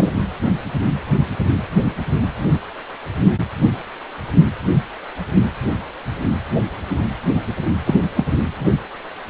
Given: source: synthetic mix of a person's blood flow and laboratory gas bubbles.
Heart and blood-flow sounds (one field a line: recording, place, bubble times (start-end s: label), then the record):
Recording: Doppler ultrasound of blood flow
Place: precordium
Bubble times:
0.00-0.10 s: bubbles
7.85-7.95 s: bubbles
8.14-8.25 s: bubbles
From the record:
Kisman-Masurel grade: 123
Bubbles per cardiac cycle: 1 to 2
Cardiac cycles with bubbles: 10 to 50%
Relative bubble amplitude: loud (0.450 to 0.775)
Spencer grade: 2 (many but less than half of the cardiac periods contain bubble signals, singularly or in groups)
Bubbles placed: anywhere in the cardiac cycle